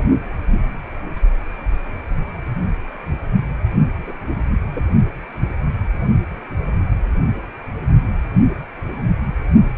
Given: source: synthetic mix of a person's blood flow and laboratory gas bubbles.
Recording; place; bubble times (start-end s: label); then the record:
Doppler ultrasound of blood flow; precordium
4.05-4.13 s: bubbles
4.75-4.88 s: bubbles
From the record:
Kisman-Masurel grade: 121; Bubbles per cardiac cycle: 1 to 2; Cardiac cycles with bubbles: 10 to 50%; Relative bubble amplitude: barely perceptible (0.100 to 0.250); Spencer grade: 2 (many but less than half of the cardiac periods contain bubble signals, singularly or in groups); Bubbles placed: only in the low amplitude regions of the cardiac cycle